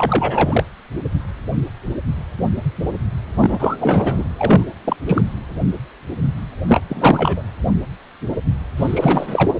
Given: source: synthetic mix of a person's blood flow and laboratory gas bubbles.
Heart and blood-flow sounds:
Doppler ultrasound of blood flow; precordium
0.00-0.64 s: bubbles
3.40-3.77 s: bubbles
3.81-4.25 s: bubbles
4.37-4.65 s: bubbles
4.84-4.96 s: bubbles
5.06-5.22 s: bubbles
6.67-6.80 s: bubbles
6.88-7.42 s: bubbles
8.77-9.50 s: bubbles
From the record:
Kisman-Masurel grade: 333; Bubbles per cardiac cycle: rolling drumbeat, 9 or more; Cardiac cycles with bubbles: 50 to 99%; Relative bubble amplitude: loud (0.450 to 0.775); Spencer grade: 3 (all of the cardiac periods contain showers or single bubble signals, but not dominating or overriding the cardiac motion signals); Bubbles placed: anywhere in the cardiac cycle

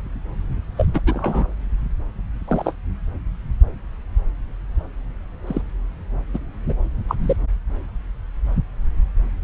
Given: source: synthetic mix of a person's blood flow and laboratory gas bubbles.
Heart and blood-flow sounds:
Doppler ultrasound of blood flow; subclavian vein
0.77-0.86 s: bubbles
0.94-1.01 s: bubbles
1.07-1.47 s: bubbles
2.48-2.74 s: bubbles
5.47-5.62 s: bubbles
6.33-6.38 s: bubbles
6.69-6.73 s: bubbles
7.08-7.15 s: bubbles
7.22-7.37 s: bubbles
From the record:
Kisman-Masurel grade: 122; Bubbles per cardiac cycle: 1 to 2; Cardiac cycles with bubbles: 10 to 50%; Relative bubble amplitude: moderate (0.250 to 0.450); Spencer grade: 2 (many but less than half of the cardiac periods contain bubble signals, singularly or in groups); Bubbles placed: anywhere in the cardiac cycle

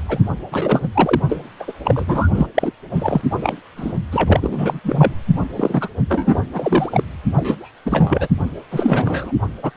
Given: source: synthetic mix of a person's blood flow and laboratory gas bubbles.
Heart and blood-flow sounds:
Doppler ultrasound of blood flow; precordium
0.08-0.19 s: bubbles
0.51-0.88 s: bubbles
0.93-1.21 s: bubbles
1.29-1.40 s: bubbles
1.59-1.72 s: bubbles
1.84-2.28 s: bubbles
2.33-2.47 s: bubbles
2.54-2.72 s: bubbles
2.95-3.22 s: bubbles
3.41-3.56 s: bubbles
3.77-3.93 s: bubbles
4.12-4.79 s: bubbles
4.83-5.13 s: bubbles
5.56-5.88 s: bubbles
6.08-6.44 s: bubbles
6.53-7.04 s: bubbles
7.34-7.74 s: bubbles
7.86-8.28 s: bubbles
8.71-9.31 s: bubbles
9.62-9.71 s: bubbles
From the record:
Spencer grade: 3 (all of the cardiac periods contain showers or single bubble signals, but not dominating or overriding the cardiac motion signals); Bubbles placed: only in the low amplitude regions of the cardiac cycle

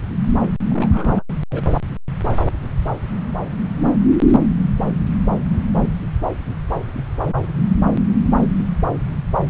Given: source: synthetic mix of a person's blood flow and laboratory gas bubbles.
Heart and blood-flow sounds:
Doppler ultrasound of blood flow; subclavian vein
0.43-0.47 s: bubbles
0.70-1.22 s: bubbles
1.51-1.64 s: bubbles
From the record:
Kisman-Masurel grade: 211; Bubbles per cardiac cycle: several, 3 to 8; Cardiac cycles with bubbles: 1 to 10%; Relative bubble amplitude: barely perceptible (0.100 to 0.250); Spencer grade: 1 (occasional bubble signal discernible with the cardiac motion signal, with majority of cardiac periods free of bubbles); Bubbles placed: anywhere in the cardiac cycle

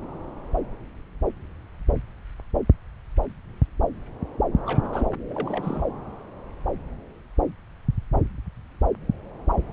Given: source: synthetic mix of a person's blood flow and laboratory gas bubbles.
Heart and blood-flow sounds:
Doppler ultrasound of blood flow; subclavian vein
4.66-4.89 s: bubbles
4.92-5.06 s: bubbles
5.29-5.86 s: bubbles
From the record:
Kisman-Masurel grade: 221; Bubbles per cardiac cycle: several, 3 to 8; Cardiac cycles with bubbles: 10 to 50%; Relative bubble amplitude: barely perceptible (0.100 to 0.250); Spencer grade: 2 (many but less than half of the cardiac periods contain bubble signals, singularly or in groups); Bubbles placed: anywhere in the cardiac cycle

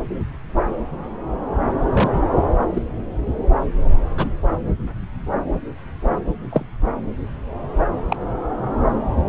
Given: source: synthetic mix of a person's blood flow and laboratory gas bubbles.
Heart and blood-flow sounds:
Doppler ultrasound of blood flow; subclavian vein
1.91-2.32 s: bubbles
2.73-2.83 s: bubbles
4.16-4.29 s: bubbles
6.50-6.64 s: bubbles
8.09-8.17 s: bubbles
From the record:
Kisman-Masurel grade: 122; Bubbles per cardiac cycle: 1 to 2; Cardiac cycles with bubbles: 10 to 50%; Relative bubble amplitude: moderate (0.250 to 0.450); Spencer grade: 2 (many but less than half of the cardiac periods contain bubble signals, singularly or in groups); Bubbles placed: anywhere in the cardiac cycle

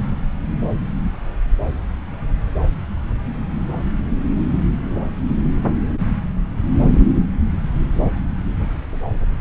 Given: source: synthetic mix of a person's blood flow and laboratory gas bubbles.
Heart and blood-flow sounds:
Doppler ultrasound of blood flow; subclavian vein
no bubbles
From the record:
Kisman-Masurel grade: 000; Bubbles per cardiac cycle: 0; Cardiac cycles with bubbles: 0%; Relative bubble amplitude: no bubbles discernible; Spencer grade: 0 (complete lack of bubble signals)

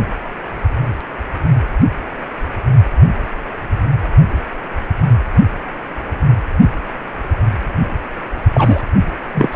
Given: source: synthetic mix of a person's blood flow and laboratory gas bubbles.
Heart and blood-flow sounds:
Doppler ultrasound of blood flow; precordium
8.54-8.81 s: bubbles
9.34-9.49 s: bubbles
9.52-9.56 s: bubbles
From the record:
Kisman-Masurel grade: 213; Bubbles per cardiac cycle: several, 3 to 8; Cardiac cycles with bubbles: 1 to 10%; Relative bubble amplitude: loud (0.450 to 0.775); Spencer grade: 1 (occasional bubble signal discernible with the cardiac motion signal, with majority of cardiac periods free of bubbles); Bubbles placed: only in the low amplitude regions of the cardiac cycle

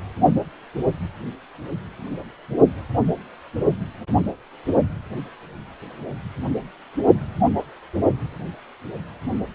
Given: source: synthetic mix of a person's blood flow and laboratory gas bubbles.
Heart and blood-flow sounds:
Doppler ultrasound of blood flow; precordium
no bubbles
From the record:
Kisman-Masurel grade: 000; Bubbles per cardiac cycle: 0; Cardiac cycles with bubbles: 0%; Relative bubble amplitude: no bubbles discernible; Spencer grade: 0 (complete lack of bubble signals)

